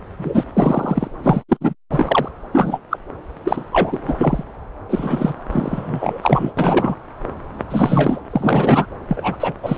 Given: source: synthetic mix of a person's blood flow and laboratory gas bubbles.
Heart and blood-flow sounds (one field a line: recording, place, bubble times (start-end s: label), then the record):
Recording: Doppler ultrasound of blood flow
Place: subclavian vein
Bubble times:
0.17-0.45 s: bubbles
0.56-1.07 s: bubbles
1.23-1.42 s: bubbles
1.49-1.57 s: bubbles
1.60-1.74 s: bubbles
1.90-2.29 s: bubbles
2.52-2.81 s: bubbles
2.90-2.99 s: bubbles
3.44-3.64 s: bubbles
3.71-4.43 s: bubbles
4.89-5.34 s: bubbles
5.51-6.52 s: bubbles
6.57-6.96 s: bubbles
7.70-8.21 s: bubbles
8.30-8.87 s: bubbles
9.08-9.37 s: bubbles
9.39-9.53 s: bubbles
9.62-9.78 s: bubbles
From the record:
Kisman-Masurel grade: 233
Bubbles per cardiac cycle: several, 3 to 8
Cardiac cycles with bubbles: 50 to 99%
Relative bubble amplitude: loud (0.450 to 0.775)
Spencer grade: 3 (all of the cardiac periods contain showers or single bubble signals, but not dominating or overriding the cardiac motion signals)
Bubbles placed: anywhere in the cardiac cycle